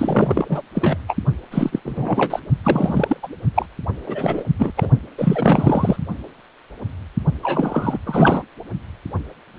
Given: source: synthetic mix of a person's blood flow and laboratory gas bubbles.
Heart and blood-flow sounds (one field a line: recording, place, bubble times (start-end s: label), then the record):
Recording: Doppler ultrasound of blood flow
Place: precordium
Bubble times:
0.00-0.62 s: bubbles
0.75-0.98 s: bubbles
1.07-1.17 s: bubbles
1.51-1.80 s: bubbles
1.84-2.40 s: bubbles
2.63-3.17 s: bubbles
3.23-3.28 s: bubbles
3.54-3.66 s: bubbles
4.06-4.44 s: bubbles
4.58-4.73 s: bubbles
4.77-4.89 s: bubbles
5.17-5.96 s: bubbles
7.42-7.99 s: bubbles
8.06-8.43 s: bubbles
From the record:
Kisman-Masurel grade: 333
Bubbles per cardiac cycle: rolling drumbeat, 9 or more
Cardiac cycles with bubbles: 50 to 99%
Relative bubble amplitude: loud (0.450 to 0.775)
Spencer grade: 3 (all of the cardiac periods contain showers or single bubble signals, but not dominating or overriding the cardiac motion signals)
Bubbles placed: only in the low amplitude regions of the cardiac cycle